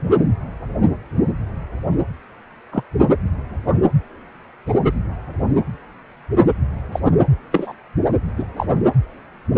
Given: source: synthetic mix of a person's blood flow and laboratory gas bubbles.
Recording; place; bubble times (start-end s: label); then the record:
Doppler ultrasound of blood flow; precordium
2.72-2.83 s: bubbles
4.65-4.77 s: bubbles
6.92-7.00 s: bubbles
7.04-7.12 s: bubbles
7.51-7.72 s: bubbles
8.37-8.46 s: bubbles
8.56-8.66 s: bubbles
From the record:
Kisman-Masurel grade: 123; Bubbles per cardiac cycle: 1 to 2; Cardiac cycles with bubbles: 10 to 50%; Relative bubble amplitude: loud (0.450 to 0.775); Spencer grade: 2 (many but less than half of the cardiac periods contain bubble signals, singularly or in groups); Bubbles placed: anywhere in the cardiac cycle